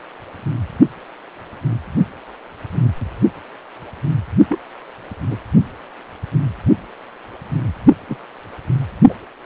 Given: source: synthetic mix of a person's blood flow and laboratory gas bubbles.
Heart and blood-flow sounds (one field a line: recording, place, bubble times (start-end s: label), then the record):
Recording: Doppler ultrasound of blood flow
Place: precordium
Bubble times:
4.49-4.59 s: bubbles
5.30-5.37 s: bubbles
8.08-8.17 s: bubbles
9.08-9.14 s: bubbles
From the record:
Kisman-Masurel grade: 122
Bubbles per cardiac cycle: 1 to 2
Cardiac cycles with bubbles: 10 to 50%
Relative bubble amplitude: moderate (0.250 to 0.450)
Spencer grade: 2 (many but less than half of the cardiac periods contain bubble signals, singularly or in groups)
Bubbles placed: only in the low amplitude regions of the cardiac cycle